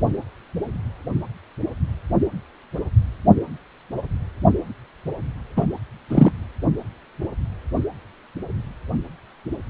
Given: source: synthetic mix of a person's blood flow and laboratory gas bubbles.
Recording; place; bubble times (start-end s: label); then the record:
Doppler ultrasound of blood flow; precordium
5.56-5.66 s: bubbles
6.09-6.31 s: bubbles
From the record:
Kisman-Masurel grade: 113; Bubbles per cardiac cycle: 1 to 2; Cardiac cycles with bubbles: 1 to 10%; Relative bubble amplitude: loud (0.450 to 0.775); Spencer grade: 1 (occasional bubble signal discernible with the cardiac motion signal, with majority of cardiac periods free of bubbles); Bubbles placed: anywhere in the cardiac cycle